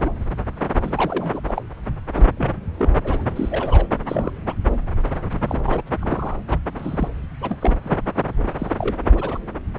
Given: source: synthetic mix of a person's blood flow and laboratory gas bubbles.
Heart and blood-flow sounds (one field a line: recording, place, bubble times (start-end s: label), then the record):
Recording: Doppler ultrasound of blood flow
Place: subclavian vein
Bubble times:
0.00-0.12 s: bubbles
0.83-1.40 s: bubbles
1.48-1.62 s: bubbles
2.15-2.23 s: bubbles
2.37-2.52 s: bubbles
2.77-2.92 s: bubbles
3.04-3.21 s: bubbles
3.35-3.86 s: bubbles
4.07-4.32 s: bubbles
4.45-4.55 s: bubbles
5.47-5.82 s: bubbles
6.00-6.37 s: bubbles
6.50-6.58 s: bubbles
6.76-7.08 s: bubbles
7.41-7.58 s: bubbles
7.61-7.76 s: bubbles
7.83-7.98 s: bubbles
8.17-8.23 s: bubbles
8.58-8.99 s: bubbles
9.15-9.38 s: bubbles
From the record:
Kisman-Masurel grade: 242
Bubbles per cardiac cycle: several, 3 to 8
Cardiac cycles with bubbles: 100%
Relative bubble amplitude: moderate (0.250 to 0.450)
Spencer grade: 3 (all of the cardiac periods contain showers or single bubble signals, but not dominating or overriding the cardiac motion signals)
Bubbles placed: anywhere in the cardiac cycle